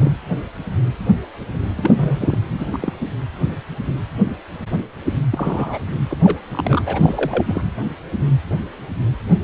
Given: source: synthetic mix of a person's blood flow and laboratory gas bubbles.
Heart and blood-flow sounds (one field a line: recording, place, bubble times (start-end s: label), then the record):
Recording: Doppler ultrasound of blood flow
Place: precordium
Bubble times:
0.00-0.12 s: bubbles
1.77-2.39 s: bubbles
2.58-2.66 s: bubbles
2.73-2.79 s: bubbles
2.81-2.93 s: bubbles
5.32-5.87 s: bubbles
6.11-6.17 s: bubbles
6.24-6.38 s: bubbles
6.51-6.83 s: bubbles
6.86-7.62 s: bubbles
From the record:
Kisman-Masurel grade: 232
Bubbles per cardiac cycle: several, 3 to 8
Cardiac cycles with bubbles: 50 to 99%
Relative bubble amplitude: moderate (0.250 to 0.450)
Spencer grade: 3 (all of the cardiac periods contain showers or single bubble signals, but not dominating or overriding the cardiac motion signals)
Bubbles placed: anywhere in the cardiac cycle